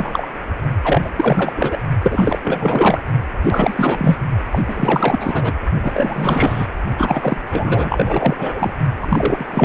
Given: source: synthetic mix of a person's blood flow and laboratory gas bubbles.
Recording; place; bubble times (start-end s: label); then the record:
Doppler ultrasound of blood flow; precordium
0.00-0.28 s: bubbles
0.83-1.10 s: bubbles
1.16-1.82 s: bubbles
2.02-2.39 s: bubbles
2.44-3.00 s: bubbles
3.43-4.16 s: bubbles
4.51-4.62 s: bubbles
4.67-5.52 s: bubbles
5.83-6.67 s: bubbles
6.97-7.41 s: bubbles
7.46-8.73 s: bubbles
9.02-9.65 s: bubbles
From the record:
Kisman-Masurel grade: 444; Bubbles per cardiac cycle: continuous sound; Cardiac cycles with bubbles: 100%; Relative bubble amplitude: maximal (0.775 to 0.999); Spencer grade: 4 (maximum detectable bubble signal sounding continuously throughout systole and diastole of every cardiac period, and overriding the amplitude of the normal cardiac signals); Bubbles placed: only in the low amplitude regions of the cardiac cycle